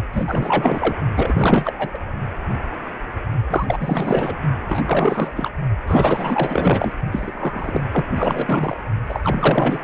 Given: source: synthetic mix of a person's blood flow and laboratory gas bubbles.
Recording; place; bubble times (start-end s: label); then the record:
Doppler ultrasound of blood flow; precordium
0.12-0.95 s: bubbles
1.16-1.99 s: bubbles
3.50-4.36 s: bubbles
4.68-4.81 s: bubbles
4.85-5.31 s: bubbles
5.35-5.50 s: bubbles
5.87-6.92 s: bubbles
7.12-7.81 s: bubbles
7.92-8.05 s: bubbles
8.15-8.77 s: bubbles
9.08-9.21 s: bubbles
9.23-9.79 s: bubbles
From the record:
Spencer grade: 4 (maximum detectable bubble signal sounding continuously throughout systole and diastole of every cardiac period, and overriding the amplitude of the normal cardiac signals); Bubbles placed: only in the low amplitude regions of the cardiac cycle